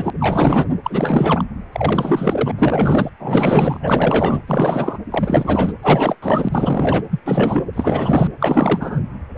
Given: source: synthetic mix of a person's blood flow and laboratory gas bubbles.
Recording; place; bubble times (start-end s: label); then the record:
Doppler ultrasound of blood flow; precordium
0.00-0.10 s: bubbles
0.20-0.65 s: bubbles
0.84-1.44 s: bubbles
1.72-2.51 s: bubbles
2.57-3.09 s: bubbles
3.19-3.79 s: bubbles
3.82-4.41 s: bubbles
4.48-4.99 s: bubbles
5.10-5.73 s: bubbles
5.82-6.17 s: bubbles
6.22-6.49 s: bubbles
6.52-7.04 s: bubbles
7.10-7.20 s: bubbles
7.26-7.64 s: bubbles
7.73-8.27 s: bubbles
8.39-9.02 s: bubbles
9.35-9.38 s: bubbles
From the record:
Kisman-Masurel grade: 444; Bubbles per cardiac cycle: continuous sound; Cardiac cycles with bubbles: 100%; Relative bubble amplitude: maximal (0.775 to 0.999); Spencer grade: 4 (maximum detectable bubble signal sounding continuously throughout systole and diastole of every cardiac period, and overriding the amplitude of the normal cardiac signals); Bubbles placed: anywhere in the cardiac cycle